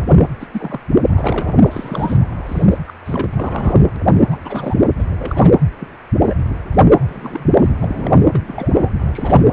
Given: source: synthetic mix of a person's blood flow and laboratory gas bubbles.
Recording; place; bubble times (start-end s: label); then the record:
Doppler ultrasound of blood flow; precordium
0.06-0.30 s: bubbles
0.40-0.47 s: bubbles
0.52-0.80 s: bubbles
1.10-1.56 s: bubbles
1.62-2.18 s: bubbles
2.46-2.67 s: bubbles
2.71-2.78 s: bubbles
2.88-2.92 s: bubbles
3.05-3.25 s: bubbles
3.32-3.80 s: bubbles
4.28-4.38 s: bubbles
4.42-4.85 s: bubbles
4.99-5.04 s: bubbles
5.21-5.54 s: bubbles
5.80-5.87 s: bubbles
6.18-6.35 s: bubbles
7.06-7.72 s: bubbles
7.79-8.14 s: bubbles
8.34-8.42 s: bubbles
8.47-8.93 s: bubbles
8.99-9.46 s: bubbles
From the record:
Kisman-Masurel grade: 232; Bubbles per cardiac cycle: several, 3 to 8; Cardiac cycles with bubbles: 50 to 99%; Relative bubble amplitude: moderate (0.250 to 0.450); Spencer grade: 3 (all of the cardiac periods contain showers or single bubble signals, but not dominating or overriding the cardiac motion signals); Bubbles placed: anywhere in the cardiac cycle